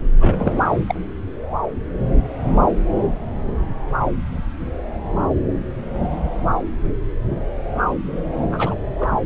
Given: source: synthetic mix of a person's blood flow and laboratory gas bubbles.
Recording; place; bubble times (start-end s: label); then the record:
Doppler ultrasound of blood flow; subclavian vein
0.20-0.54 s: bubbles
0.87-0.94 s: bubbles
8.52-8.78 s: bubbles
8.97-9.18 s: bubbles
From the record:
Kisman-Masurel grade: 222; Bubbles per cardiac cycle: several, 3 to 8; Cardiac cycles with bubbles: 10 to 50%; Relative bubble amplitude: moderate (0.250 to 0.450); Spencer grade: 2 (many but less than half of the cardiac periods contain bubble signals, singularly or in groups); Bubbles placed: anywhere in the cardiac cycle